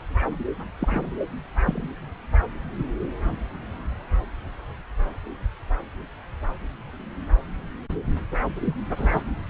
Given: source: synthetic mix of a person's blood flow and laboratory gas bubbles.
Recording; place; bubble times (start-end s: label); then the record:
Doppler ultrasound of blood flow; subclavian vein
0.80-1.12 s: bubbles
1.66-1.89 s: bubbles
8.61-8.76 s: bubbles
8.96-9.23 s: bubbles
From the record:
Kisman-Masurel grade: 122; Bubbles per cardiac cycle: 1 to 2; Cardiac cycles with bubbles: 10 to 50%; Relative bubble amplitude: moderate (0.250 to 0.450); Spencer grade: 2 (many but less than half of the cardiac periods contain bubble signals, singularly or in groups); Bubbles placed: anywhere in the cardiac cycle